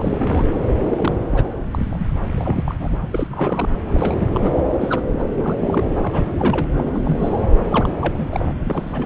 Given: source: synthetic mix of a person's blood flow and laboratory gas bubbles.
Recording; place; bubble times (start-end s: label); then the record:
Doppler ultrasound of blood flow; subclavian vein
0.00-0.46 s: bubbles
0.91-1.14 s: bubbles
1.30-1.49 s: bubbles
1.71-2.11 s: bubbles
2.17-2.22 s: bubbles
2.35-2.75 s: bubbles
2.79-2.96 s: bubbles
3.02-3.06 s: bubbles
3.12-3.27 s: bubbles
3.30-3.69 s: bubbles
3.87-4.27 s: bubbles
4.34-4.51 s: bubbles
4.80-5.04 s: bubbles
5.18-5.25 s: bubbles
5.34-5.55 s: bubbles
5.66-5.84 s: bubbles
6.02-6.33 s: bubbles
6.39-6.67 s: bubbles
6.79-7.01 s: bubbles
7.04-7.47 s: bubbles
7.69-7.95 s: bubbles
7.99-8.28 s: bubbles
8.31-8.53 s: bubbles
8.65-9.06 s: bubbles
From the record:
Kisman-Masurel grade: 342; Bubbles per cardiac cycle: rolling drumbeat, 9 or more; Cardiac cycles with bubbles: 100%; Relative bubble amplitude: moderate (0.250 to 0.450); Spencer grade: 3 (all of the cardiac periods contain showers or single bubble signals, but not dominating or overriding the cardiac motion signals); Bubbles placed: anywhere in the cardiac cycle